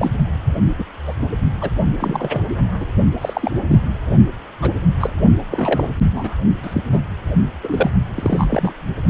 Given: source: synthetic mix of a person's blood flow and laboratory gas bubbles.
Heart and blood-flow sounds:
Doppler ultrasound of blood flow; precordium
0.00-0.12 s: bubbles
0.78-0.84 s: bubbles
1.07-1.14 s: bubbles
1.61-1.69 s: bubbles
1.98-2.42 s: bubbles
2.80-2.86 s: bubbles
3.21-3.52 s: bubbles
3.69-3.80 s: bubbles
4.62-4.71 s: bubbles
4.99-5.10 s: bubbles
5.51-5.90 s: bubbles
6.13-6.37 s: bubbles
6.63-6.81 s: bubbles
6.93-7.00 s: bubbles
7.63-7.90 s: bubbles
8.14-8.46 s: bubbles
8.49-8.72 s: bubbles
From the record:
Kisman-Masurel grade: 232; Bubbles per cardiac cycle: several, 3 to 8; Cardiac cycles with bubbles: 50 to 99%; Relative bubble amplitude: moderate (0.250 to 0.450); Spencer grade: 3 (all of the cardiac periods contain showers or single bubble signals, but not dominating or overriding the cardiac motion signals); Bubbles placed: only in the low amplitude regions of the cardiac cycle

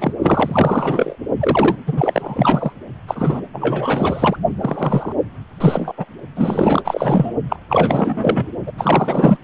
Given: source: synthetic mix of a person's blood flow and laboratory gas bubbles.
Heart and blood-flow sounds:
Doppler ultrasound of blood flow; precordium
0.00-0.12 s: bubbles
0.21-1.16 s: bubbles
1.40-1.76 s: bubbles
1.87-2.73 s: bubbles
3.08-3.41 s: bubbles
3.52-4.36 s: bubbles
4.61-5.12 s: bubbles
5.60-5.92 s: bubbles
5.97-6.05 s: bubbles
6.35-6.82 s: bubbles
6.84-7.32 s: bubbles
7.49-7.57 s: bubbles
7.69-8.49 s: bubbles
8.66-8.72 s: bubbles
8.78-9.38 s: bubbles
From the record:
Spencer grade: 4 (maximum detectable bubble signal sounding continuously throughout systole and diastole of every cardiac period, and overriding the amplitude of the normal cardiac signals); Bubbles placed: only in the low amplitude regions of the cardiac cycle

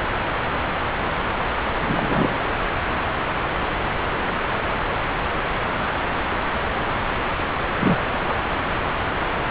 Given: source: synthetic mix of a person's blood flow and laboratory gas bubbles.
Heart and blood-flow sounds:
Doppler ultrasound of blood flow; subclavian vein
1.79-2.36 s: bubbles
7.81-7.97 s: bubbles
8.29-8.35 s: bubbles
From the record:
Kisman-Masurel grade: 222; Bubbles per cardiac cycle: several, 3 to 8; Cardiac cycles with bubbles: 10 to 50%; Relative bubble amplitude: moderate (0.250 to 0.450); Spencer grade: 2 (many but less than half of the cardiac periods contain bubble signals, singularly or in groups); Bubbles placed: anywhere in the cardiac cycle

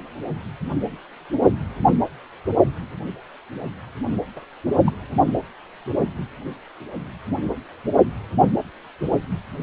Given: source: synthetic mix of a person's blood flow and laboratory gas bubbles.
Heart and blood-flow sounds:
Doppler ultrasound of blood flow; precordium
4.36-4.41 s: bubbles
4.86-4.92 s: bubbles
From the record:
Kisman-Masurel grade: 121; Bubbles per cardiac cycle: 1 to 2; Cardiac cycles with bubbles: 10 to 50%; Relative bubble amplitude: barely perceptible (0.100 to 0.250); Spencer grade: 2 (many but less than half of the cardiac periods contain bubble signals, singularly or in groups); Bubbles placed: only in the low amplitude regions of the cardiac cycle

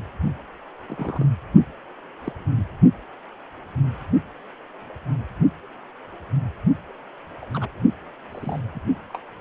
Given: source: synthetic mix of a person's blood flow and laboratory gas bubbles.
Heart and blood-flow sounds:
Doppler ultrasound of blood flow; precordium
0.88-1.26 s: bubbles
2.24-2.32 s: bubbles
7.42-7.46 s: bubbles
7.52-7.68 s: bubbles
8.31-8.60 s: bubbles
8.74-8.81 s: bubbles
9.09-9.19 s: bubbles
From the record:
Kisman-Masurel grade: 121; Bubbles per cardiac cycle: 1 to 2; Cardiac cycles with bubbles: 10 to 50%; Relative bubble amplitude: barely perceptible (0.100 to 0.250); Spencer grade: 2 (many but less than half of the cardiac periods contain bubble signals, singularly or in groups); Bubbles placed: only in the low amplitude regions of the cardiac cycle

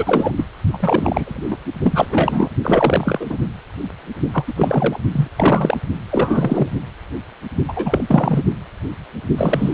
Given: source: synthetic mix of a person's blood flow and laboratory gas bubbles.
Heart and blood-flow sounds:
Doppler ultrasound of blood flow; precordium
0.00-0.32 s: bubbles
0.36-0.45 s: bubbles
0.72-1.57 s: bubbles
1.83-2.49 s: bubbles
2.62-3.38 s: bubbles
4.31-4.44 s: bubbles
4.47-4.53 s: bubbles
4.56-5.00 s: bubbles
5.11-5.28 s: bubbles
5.37-5.80 s: bubbles
6.10-6.68 s: bubbles
7.68-7.72 s: bubbles
7.75-8.04 s: bubbles
8.07-8.43 s: bubbles
9.38-9.74 s: bubbles
From the record:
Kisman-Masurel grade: 333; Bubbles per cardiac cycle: rolling drumbeat, 9 or more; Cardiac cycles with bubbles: 50 to 99%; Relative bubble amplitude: loud (0.450 to 0.775); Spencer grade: 3 (all of the cardiac periods contain showers or single bubble signals, but not dominating or overriding the cardiac motion signals); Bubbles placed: only in the low amplitude regions of the cardiac cycle

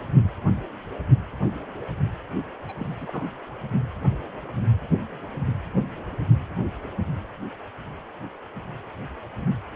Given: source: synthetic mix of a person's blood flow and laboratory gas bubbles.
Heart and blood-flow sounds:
Doppler ultrasound of blood flow; precordium
2.68-2.94 s: bubbles
3.00-3.32 s: bubbles
From the record:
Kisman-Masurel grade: 211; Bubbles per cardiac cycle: several, 3 to 8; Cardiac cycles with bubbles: 1 to 10%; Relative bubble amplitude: barely perceptible (0.100 to 0.250); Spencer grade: 1 (occasional bubble signal discernible with the cardiac motion signal, with majority of cardiac periods free of bubbles); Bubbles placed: anywhere in the cardiac cycle

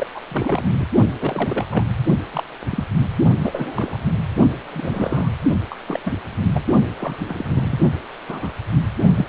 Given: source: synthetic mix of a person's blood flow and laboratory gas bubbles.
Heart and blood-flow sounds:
Doppler ultrasound of blood flow; precordium
0.00-0.07 s: bubbles
0.15-0.20 s: bubbles
0.32-0.88 s: bubbles
1.19-1.65 s: bubbles
1.70-1.86 s: bubbles
2.33-2.43 s: bubbles
2.70-2.83 s: bubbles
3.42-4.00 s: bubbles
4.71-5.29 s: bubbles
5.69-5.82 s: bubbles
5.87-6.00 s: bubbles
6.04-6.14 s: bubbles
6.54-6.63 s: bubbles
6.99-7.15 s: bubbles
7.27-7.44 s: bubbles
7.48-7.77 s: bubbles
8.28-8.52 s: bubbles
9.16-9.28 s: bubbles
From the record:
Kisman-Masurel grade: 242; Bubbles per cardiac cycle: several, 3 to 8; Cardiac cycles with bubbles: 100%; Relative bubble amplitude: moderate (0.250 to 0.450); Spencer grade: 3 (all of the cardiac periods contain showers or single bubble signals, but not dominating or overriding the cardiac motion signals); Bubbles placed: only in the low amplitude regions of the cardiac cycle

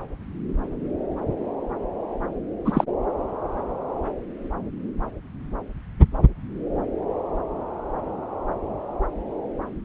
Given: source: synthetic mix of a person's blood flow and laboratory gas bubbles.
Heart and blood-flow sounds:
Doppler ultrasound of blood flow; subclavian vein
2.65-2.84 s: bubbles
From the record:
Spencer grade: 1 (occasional bubble signal discernible with the cardiac motion signal, with majority of cardiac periods free of bubbles); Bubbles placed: anywhere in the cardiac cycle

